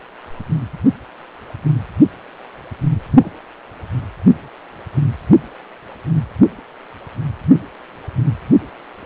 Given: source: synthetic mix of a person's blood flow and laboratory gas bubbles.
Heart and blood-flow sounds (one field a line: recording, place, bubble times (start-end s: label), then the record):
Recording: Doppler ultrasound of blood flow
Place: precordium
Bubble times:
3.15-3.29 s: bubbles
From the record:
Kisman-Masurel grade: 121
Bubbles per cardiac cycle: 1 to 2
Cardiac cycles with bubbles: 10 to 50%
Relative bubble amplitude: barely perceptible (0.100 to 0.250)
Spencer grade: 2 (many but less than half of the cardiac periods contain bubble signals, singularly or in groups)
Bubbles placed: anywhere in the cardiac cycle